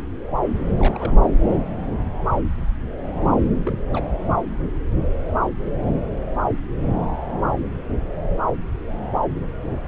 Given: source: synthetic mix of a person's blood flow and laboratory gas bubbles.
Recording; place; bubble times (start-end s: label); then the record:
Doppler ultrasound of blood flow; subclavian vein
0.79-1.20 s: bubbles
3.65-3.79 s: bubbles
3.93-4.04 s: bubbles
From the record:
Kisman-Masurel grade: 221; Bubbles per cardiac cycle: several, 3 to 8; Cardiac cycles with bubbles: 10 to 50%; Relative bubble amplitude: barely perceptible (0.100 to 0.250); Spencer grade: 2 (many but less than half of the cardiac periods contain bubble signals, singularly or in groups); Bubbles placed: anywhere in the cardiac cycle